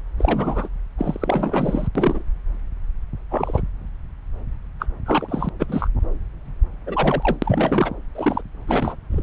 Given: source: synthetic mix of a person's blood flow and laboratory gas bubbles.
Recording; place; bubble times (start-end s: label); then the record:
Doppler ultrasound of blood flow; subclavian vein
0.18-0.69 s: bubbles
0.99-1.88 s: bubbles
1.95-2.23 s: bubbles
3.31-3.63 s: bubbles
4.79-4.86 s: bubbles
5.06-5.49 s: bubbles
5.59-5.66 s: bubbles
5.69-5.88 s: bubbles
6.86-7.37 s: bubbles
7.42-7.92 s: bubbles
8.15-8.41 s: bubbles
8.67-8.96 s: bubbles
9.11-9.23 s: bubbles
From the record:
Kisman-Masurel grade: 232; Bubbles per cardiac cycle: several, 3 to 8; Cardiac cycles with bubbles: 50 to 99%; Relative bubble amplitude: moderate (0.250 to 0.450); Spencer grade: 3 (all of the cardiac periods contain showers or single bubble signals, but not dominating or overriding the cardiac motion signals); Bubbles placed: anywhere in the cardiac cycle